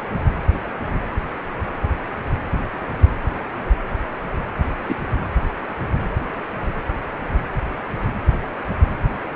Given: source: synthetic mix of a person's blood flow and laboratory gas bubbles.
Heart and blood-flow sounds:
Doppler ultrasound of blood flow; precordium
4.89-4.95 s: bubbles
From the record:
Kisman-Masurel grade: 113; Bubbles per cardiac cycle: 1 to 2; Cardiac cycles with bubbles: 1 to 10%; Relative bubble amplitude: loud (0.450 to 0.775); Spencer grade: 1 (occasional bubble signal discernible with the cardiac motion signal, with majority of cardiac periods free of bubbles); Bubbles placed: anywhere in the cardiac cycle

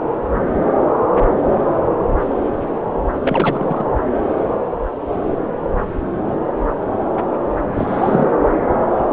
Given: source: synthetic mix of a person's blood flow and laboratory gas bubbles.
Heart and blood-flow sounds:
Doppler ultrasound of blood flow; subclavian vein
3.15-3.85 s: bubbles
7.75-8.28 s: bubbles
From the record:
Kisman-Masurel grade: 222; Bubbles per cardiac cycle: several, 3 to 8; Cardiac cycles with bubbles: 10 to 50%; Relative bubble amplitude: moderate (0.250 to 0.450); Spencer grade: 2 (many but less than half of the cardiac periods contain bubble signals, singularly or in groups); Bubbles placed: anywhere in the cardiac cycle

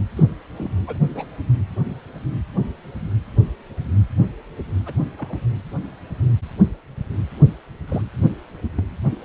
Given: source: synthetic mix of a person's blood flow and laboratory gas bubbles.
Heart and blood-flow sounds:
Doppler ultrasound of blood flow; precordium
0.17-0.23 s: bubbles
0.56-0.71 s: bubbles
0.87-0.98 s: bubbles
1.15-1.25 s: bubbles
1.89-1.96 s: bubbles
4.86-4.93 s: bubbles
5.18-5.38 s: bubbles
7.88-8.02 s: bubbles
8.64-8.84 s: bubbles
From the record:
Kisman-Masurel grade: 121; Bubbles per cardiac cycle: 1 to 2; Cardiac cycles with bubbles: 10 to 50%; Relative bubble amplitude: barely perceptible (0.100 to 0.250); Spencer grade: 2 (many but less than half of the cardiac periods contain bubble signals, singularly or in groups); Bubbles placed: anywhere in the cardiac cycle

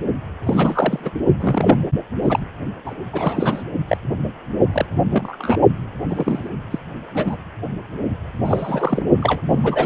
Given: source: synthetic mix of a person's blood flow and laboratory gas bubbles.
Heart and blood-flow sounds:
Doppler ultrasound of blood flow; precordium
0.43-1.10 s: bubbles
1.40-1.89 s: bubbles
2.22-2.40 s: bubbles
2.86-2.95 s: bubbles
3.13-3.63 s: bubbles
3.88-3.97 s: bubbles
4.72-4.86 s: bubbles
5.11-5.57 s: bubbles
6.10-6.49 s: bubbles
6.71-6.79 s: bubbles
7.14-7.37 s: bubbles
8.45-9.03 s: bubbles
9.21-9.42 s: bubbles
9.48-9.86 s: bubbles
From the record:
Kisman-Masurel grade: 242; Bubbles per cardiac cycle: several, 3 to 8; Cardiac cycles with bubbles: 100%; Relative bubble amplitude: moderate (0.250 to 0.450); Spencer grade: 3 (all of the cardiac periods contain showers or single bubble signals, but not dominating or overriding the cardiac motion signals); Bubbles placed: only in the low amplitude regions of the cardiac cycle

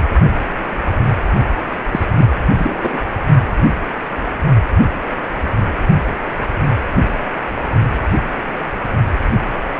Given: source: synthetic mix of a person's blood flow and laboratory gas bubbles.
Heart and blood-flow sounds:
Doppler ultrasound of blood flow; precordium
1.92-2.04 s: bubbles
2.17-2.27 s: bubbles
2.57-2.99 s: bubbles
From the record:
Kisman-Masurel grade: 212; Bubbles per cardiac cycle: several, 3 to 8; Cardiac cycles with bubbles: 1 to 10%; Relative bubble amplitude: moderate (0.250 to 0.450); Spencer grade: 1 (occasional bubble signal discernible with the cardiac motion signal, with majority of cardiac periods free of bubbles); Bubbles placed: only in the low amplitude regions of the cardiac cycle

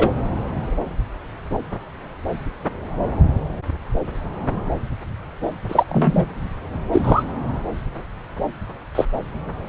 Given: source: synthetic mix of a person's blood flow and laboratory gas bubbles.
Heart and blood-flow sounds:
Doppler ultrasound of blood flow; subclavian vein
0.00-0.10 s: bubbles
5.68-5.84 s: bubbles
5.88-6.25 s: bubbles
6.92-7.23 s: bubbles
8.95-9.05 s: bubbles
From the record:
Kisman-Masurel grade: 123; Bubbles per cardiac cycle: 1 to 2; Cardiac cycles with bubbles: 10 to 50%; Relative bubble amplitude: loud (0.450 to 0.775); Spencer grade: 2 (many but less than half of the cardiac periods contain bubble signals, singularly or in groups); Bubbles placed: anywhere in the cardiac cycle

